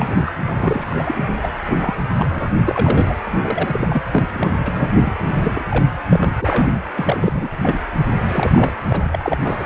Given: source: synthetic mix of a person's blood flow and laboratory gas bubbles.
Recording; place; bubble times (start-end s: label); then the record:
Doppler ultrasound of blood flow; precordium
0.00-0.32 s: bubbles
0.45-1.17 s: bubbles
1.42-1.48 s: bubbles
1.66-2.04 s: bubbles
2.11-2.50 s: bubbles
2.65-3.15 s: bubbles
3.42-4.03 s: bubbles
4.10-4.24 s: bubbles
4.33-4.59 s: bubbles
4.66-5.13 s: bubbles
5.26-5.64 s: bubbles
5.70-5.93 s: bubbles
6.09-6.33 s: bubbles
6.42-6.70 s: bubbles
6.96-7.49 s: bubbles
7.62-7.79 s: bubbles
7.98-8.04 s: bubbles
8.24-8.72 s: bubbles
8.89-9.06 s: bubbles
9.12-9.38 s: bubbles
9.40-9.65 s: bubbles
From the record:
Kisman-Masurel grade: 342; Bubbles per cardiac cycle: rolling drumbeat, 9 or more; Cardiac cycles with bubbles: 100%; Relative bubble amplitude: moderate (0.250 to 0.450); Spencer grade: 3 (all of the cardiac periods contain showers or single bubble signals, but not dominating or overriding the cardiac motion signals); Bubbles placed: anywhere in the cardiac cycle